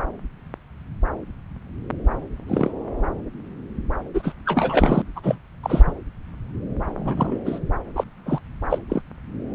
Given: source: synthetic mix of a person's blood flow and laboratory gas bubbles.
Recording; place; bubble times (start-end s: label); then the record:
Doppler ultrasound of blood flow; subclavian vein
2.47-2.71 s: bubbles
4.14-4.34 s: bubbles
4.45-5.02 s: bubbles
5.16-5.21 s: bubbles
5.23-5.37 s: bubbles
5.63-5.82 s: bubbles
5.87-5.92 s: bubbles
6.97-7.41 s: bubbles
7.46-7.59 s: bubbles
7.96-8.04 s: bubbles
8.25-8.41 s: bubbles
8.70-8.79 s: bubbles
8.89-9.02 s: bubbles
From the record:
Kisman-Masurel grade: 232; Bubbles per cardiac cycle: several, 3 to 8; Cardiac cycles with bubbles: 50 to 99%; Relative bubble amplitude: moderate (0.250 to 0.450); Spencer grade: 3 (all of the cardiac periods contain showers or single bubble signals, but not dominating or overriding the cardiac motion signals); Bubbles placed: anywhere in the cardiac cycle